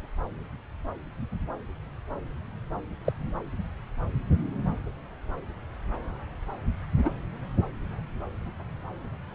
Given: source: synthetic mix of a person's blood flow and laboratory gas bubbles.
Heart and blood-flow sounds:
Doppler ultrasound of blood flow; subclavian vein
3.04-3.12 s: bubbles
7.04-7.10 s: bubbles
From the record:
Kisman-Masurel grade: 122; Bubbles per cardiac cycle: 1 to 2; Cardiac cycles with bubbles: 10 to 50%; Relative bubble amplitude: moderate (0.250 to 0.450); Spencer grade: 2 (many but less than half of the cardiac periods contain bubble signals, singularly or in groups); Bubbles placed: anywhere in the cardiac cycle

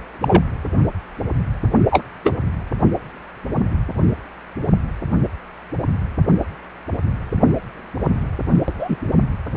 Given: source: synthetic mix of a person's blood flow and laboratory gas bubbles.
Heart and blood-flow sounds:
Doppler ultrasound of blood flow; precordium
0.21-0.43 s: bubbles
1.90-2.04 s: bubbles
2.23-2.35 s: bubbles
8.79-8.96 s: bubbles
From the record:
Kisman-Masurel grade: 123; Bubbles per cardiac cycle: 1 to 2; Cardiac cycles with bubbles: 10 to 50%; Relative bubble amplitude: loud (0.450 to 0.775); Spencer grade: 2 (many but less than half of the cardiac periods contain bubble signals, singularly or in groups); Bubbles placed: anywhere in the cardiac cycle

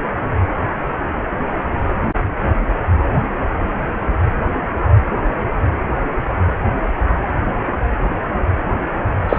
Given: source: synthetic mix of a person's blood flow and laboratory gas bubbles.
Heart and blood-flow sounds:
Doppler ultrasound of blood flow; precordium
9.29-9.38 s: bubbles
From the record:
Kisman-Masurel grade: 213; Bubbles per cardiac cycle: several, 3 to 8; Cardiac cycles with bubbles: 1 to 10%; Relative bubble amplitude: loud (0.450 to 0.775); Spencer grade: 1 (occasional bubble signal discernible with the cardiac motion signal, with majority of cardiac periods free of bubbles); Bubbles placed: anywhere in the cardiac cycle

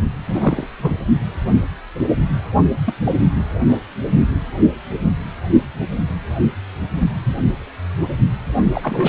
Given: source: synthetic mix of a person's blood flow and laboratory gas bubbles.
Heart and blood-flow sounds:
Doppler ultrasound of blood flow; precordium
0.29-0.67 s: bubbles
0.78-0.98 s: bubbles
2.86-2.93 s: bubbles
3.04-3.15 s: bubbles
3.69-3.79 s: bubbles
8.72-9.09 s: bubbles
From the record:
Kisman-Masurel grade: 222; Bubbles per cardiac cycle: several, 3 to 8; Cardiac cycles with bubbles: 10 to 50%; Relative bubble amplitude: moderate (0.250 to 0.450); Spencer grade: 2 (many but less than half of the cardiac periods contain bubble signals, singularly or in groups); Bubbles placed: only in the low amplitude regions of the cardiac cycle

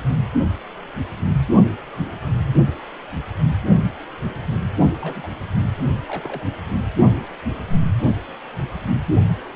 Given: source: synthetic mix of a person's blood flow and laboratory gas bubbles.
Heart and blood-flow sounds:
Doppler ultrasound of blood flow; precordium
4.94-5.28 s: bubbles
6.08-6.49 s: bubbles
6.71-6.78 s: bubbles
From the record:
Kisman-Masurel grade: 221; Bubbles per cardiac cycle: several, 3 to 8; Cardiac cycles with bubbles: 10 to 50%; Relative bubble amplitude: barely perceptible (0.100 to 0.250); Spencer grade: 2 (many but less than half of the cardiac periods contain bubble signals, singularly or in groups); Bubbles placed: only in the low amplitude regions of the cardiac cycle

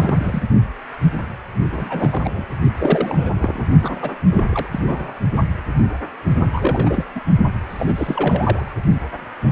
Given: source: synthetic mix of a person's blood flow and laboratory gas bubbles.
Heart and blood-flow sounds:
Doppler ultrasound of blood flow; precordium
0.00-0.42 s: bubbles
1.70-2.46 s: bubbles
2.79-3.32 s: bubbles
3.38-3.65 s: bubbles
3.82-3.99 s: bubbles
4.01-4.12 s: bubbles
4.31-4.44 s: bubbles
4.51-4.67 s: bubbles
4.72-4.80 s: bubbles
4.85-5.14 s: bubbles
6.53-7.05 s: bubbles
7.14-7.21 s: bubbles
7.70-7.93 s: bubbles
7.95-8.71 s: bubbles
From the record:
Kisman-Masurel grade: 332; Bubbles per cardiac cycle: rolling drumbeat, 9 or more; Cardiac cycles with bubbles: 50 to 99%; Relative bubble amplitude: moderate (0.250 to 0.450); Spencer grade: 3 (all of the cardiac periods contain showers or single bubble signals, but not dominating or overriding the cardiac motion signals); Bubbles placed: only in the low amplitude regions of the cardiac cycle

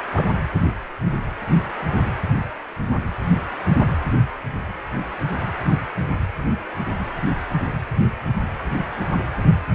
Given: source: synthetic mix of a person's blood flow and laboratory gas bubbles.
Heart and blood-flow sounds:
Doppler ultrasound of blood flow; precordium
0.13-0.29 s: bubbles
From the record:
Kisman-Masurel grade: 111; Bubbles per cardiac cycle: 1 to 2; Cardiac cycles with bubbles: 1 to 10%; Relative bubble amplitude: barely perceptible (0.100 to 0.250); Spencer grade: 1 (occasional bubble signal discernible with the cardiac motion signal, with majority of cardiac periods free of bubbles); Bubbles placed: anywhere in the cardiac cycle

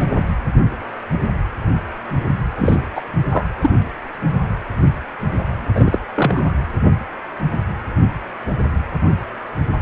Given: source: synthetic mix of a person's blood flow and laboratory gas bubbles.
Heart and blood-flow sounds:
Doppler ultrasound of blood flow; precordium
0.00-0.04 s: bubbles
2.57-2.84 s: bubbles
2.96-3.02 s: bubbles
3.31-3.47 s: bubbles
3.61-3.71 s: bubbles
5.75-5.99 s: bubbles
6.16-6.52 s: bubbles
From the record:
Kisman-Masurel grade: 223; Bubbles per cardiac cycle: several, 3 to 8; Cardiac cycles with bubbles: 10 to 50%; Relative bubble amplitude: loud (0.450 to 0.775); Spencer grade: 2 (many but less than half of the cardiac periods contain bubble signals, singularly or in groups); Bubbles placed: anywhere in the cardiac cycle

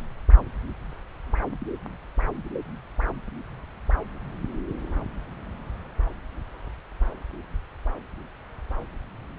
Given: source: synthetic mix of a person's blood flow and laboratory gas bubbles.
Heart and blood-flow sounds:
Doppler ultrasound of blood flow; subclavian vein
no bubbles
From the record:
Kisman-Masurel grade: 000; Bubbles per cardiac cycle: 0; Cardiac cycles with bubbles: 0%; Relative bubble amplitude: no bubbles discernible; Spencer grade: 0 (complete lack of bubble signals)

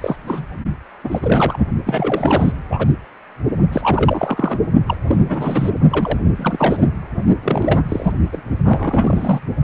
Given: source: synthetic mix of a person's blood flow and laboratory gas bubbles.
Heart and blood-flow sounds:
Doppler ultrasound of blood flow; precordium
0.00-0.17 s: bubbles
0.27-0.45 s: bubbles
1.03-1.20 s: bubbles
1.22-1.57 s: bubbles
1.84-2.52 s: bubbles
2.70-2.93 s: bubbles
3.72-4.60 s: bubbles
4.86-4.96 s: bubbles
5.07-5.71 s: bubbles
5.90-6.18 s: bubbles
6.36-6.87 s: bubbles
7.43-7.84 s: bubbles
7.88-8.12 s: bubbles
8.32-8.42 s: bubbles
8.65-9.40 s: bubbles
From the record:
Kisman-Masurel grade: 342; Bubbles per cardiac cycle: rolling drumbeat, 9 or more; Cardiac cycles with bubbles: 100%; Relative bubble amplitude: moderate (0.250 to 0.450); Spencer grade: 3 (all of the cardiac periods contain showers or single bubble signals, but not dominating or overriding the cardiac motion signals); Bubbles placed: only in the low amplitude regions of the cardiac cycle

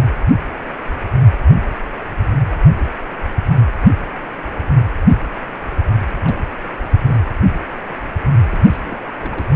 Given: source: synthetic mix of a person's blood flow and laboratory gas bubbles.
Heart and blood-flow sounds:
Doppler ultrasound of blood flow; precordium
6.25-6.37 s: bubbles
6.92-6.96 s: bubbles
7.06-7.18 s: bubbles
8.45-9.04 s: bubbles
9.19-9.47 s: bubbles
From the record:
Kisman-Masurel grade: 221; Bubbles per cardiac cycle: several, 3 to 8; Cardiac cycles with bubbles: 10 to 50%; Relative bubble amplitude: barely perceptible (0.100 to 0.250); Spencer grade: 2 (many but less than half of the cardiac periods contain bubble signals, singularly or in groups); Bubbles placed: anywhere in the cardiac cycle

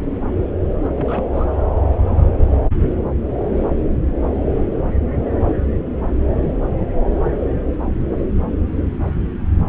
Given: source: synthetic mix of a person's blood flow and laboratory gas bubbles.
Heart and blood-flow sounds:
Doppler ultrasound of blood flow; subclavian vein
0.97-1.24 s: bubbles
1.33-1.50 s: bubbles
From the record:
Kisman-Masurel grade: 221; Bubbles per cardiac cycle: several, 3 to 8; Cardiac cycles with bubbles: 10 to 50%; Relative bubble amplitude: barely perceptible (0.100 to 0.250); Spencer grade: 2 (many but less than half of the cardiac periods contain bubble signals, singularly or in groups); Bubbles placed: anywhere in the cardiac cycle

